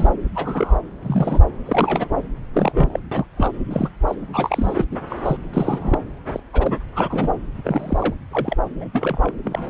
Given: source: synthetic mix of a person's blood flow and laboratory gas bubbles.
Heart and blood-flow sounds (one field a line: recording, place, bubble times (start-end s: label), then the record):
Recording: Doppler ultrasound of blood flow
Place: subclavian vein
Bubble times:
0.00-0.10 s: bubbles
0.35-0.79 s: bubbles
1.03-1.42 s: bubbles
1.66-2.08 s: bubbles
2.53-3.00 s: bubbles
3.11-3.25 s: bubbles
3.37-3.52 s: bubbles
3.70-3.88 s: bubbles
4.08-4.15 s: bubbles
4.33-4.84 s: bubbles
4.91-4.96 s: bubbles
5.08-5.37 s: bubbles
5.53-5.98 s: bubbles
6.33-6.40 s: bubbles
6.53-6.79 s: bubbles
6.95-7.32 s: bubbles
7.64-8.14 s: bubbles
8.31-8.56 s: bubbles
8.79-8.88 s: bubbles
8.93-9.31 s: bubbles
9.45-9.70 s: bubbles
From the record:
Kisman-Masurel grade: 242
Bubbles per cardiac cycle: several, 3 to 8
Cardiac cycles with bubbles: 100%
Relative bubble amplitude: moderate (0.250 to 0.450)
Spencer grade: 3 (all of the cardiac periods contain showers or single bubble signals, but not dominating or overriding the cardiac motion signals)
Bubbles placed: anywhere in the cardiac cycle